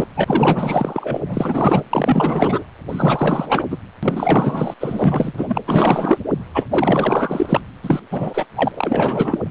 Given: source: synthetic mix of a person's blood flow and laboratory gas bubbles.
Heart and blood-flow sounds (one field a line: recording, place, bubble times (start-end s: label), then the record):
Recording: Doppler ultrasound of blood flow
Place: precordium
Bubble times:
0.00-0.07 s: bubbles
0.15-1.21 s: bubbles
1.27-1.83 s: bubbles
1.90-2.64 s: bubbles
2.89-3.66 s: bubbles
3.71-3.79 s: bubbles
4.03-4.74 s: bubbles
4.80-5.33 s: bubbles
5.37-5.58 s: bubbles
5.67-6.19 s: bubbles
6.54-6.65 s: bubbles
6.71-7.62 s: bubbles
7.82-8.00 s: bubbles
8.11-8.46 s: bubbles
8.55-8.71 s: bubbles
8.75-9.38 s: bubbles
From the record:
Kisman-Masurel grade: 444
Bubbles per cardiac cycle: continuous sound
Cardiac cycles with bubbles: 100%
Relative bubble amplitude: maximal (0.775 to 0.999)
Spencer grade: 4 (maximum detectable bubble signal sounding continuously throughout systole and diastole of every cardiac period, and overriding the amplitude of the normal cardiac signals)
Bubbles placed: anywhere in the cardiac cycle